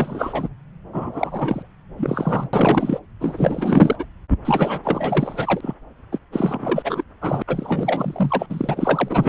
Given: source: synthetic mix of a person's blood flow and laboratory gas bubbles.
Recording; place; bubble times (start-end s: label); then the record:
Doppler ultrasound of blood flow; subclavian vein
0.00-0.49 s: bubbles
0.92-1.70 s: bubbles
1.98-2.49 s: bubbles
2.53-3.00 s: bubbles
3.20-4.05 s: bubbles
4.45-5.75 s: bubbles
6.12-6.19 s: bubbles
6.32-7.04 s: bubbles
7.21-7.42 s: bubbles
7.47-8.46 s: bubbles
8.49-9.28 s: bubbles
From the record:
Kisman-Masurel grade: 444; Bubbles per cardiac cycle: continuous sound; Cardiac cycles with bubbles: 100%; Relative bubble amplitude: maximal (0.775 to 0.999); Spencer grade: 4 (maximum detectable bubble signal sounding continuously throughout systole and diastole of every cardiac period, and overriding the amplitude of the normal cardiac signals); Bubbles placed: anywhere in the cardiac cycle